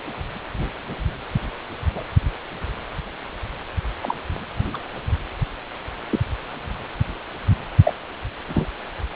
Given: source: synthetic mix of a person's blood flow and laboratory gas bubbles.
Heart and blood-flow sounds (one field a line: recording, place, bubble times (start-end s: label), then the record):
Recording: Doppler ultrasound of blood flow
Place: precordium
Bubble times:
1.95-2.03 s: bubbles
4.02-4.17 s: bubbles
4.73-4.78 s: bubbles
6.09-6.19 s: bubbles
7.85-7.93 s: bubbles
8.48-8.67 s: bubbles
From the record:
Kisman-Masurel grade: 122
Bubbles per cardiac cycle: 1 to 2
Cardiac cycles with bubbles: 10 to 50%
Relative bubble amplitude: moderate (0.250 to 0.450)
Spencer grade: 2 (many but less than half of the cardiac periods contain bubble signals, singularly or in groups)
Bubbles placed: anywhere in the cardiac cycle